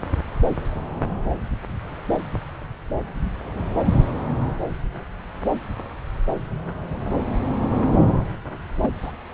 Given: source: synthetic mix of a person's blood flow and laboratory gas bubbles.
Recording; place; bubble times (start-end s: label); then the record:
Doppler ultrasound of blood flow; subclavian vein
8.82-8.90 s: bubbles
9.02-9.12 s: bubbles
From the record:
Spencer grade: 2 (many but less than half of the cardiac periods contain bubble signals, singularly or in groups); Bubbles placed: anywhere in the cardiac cycle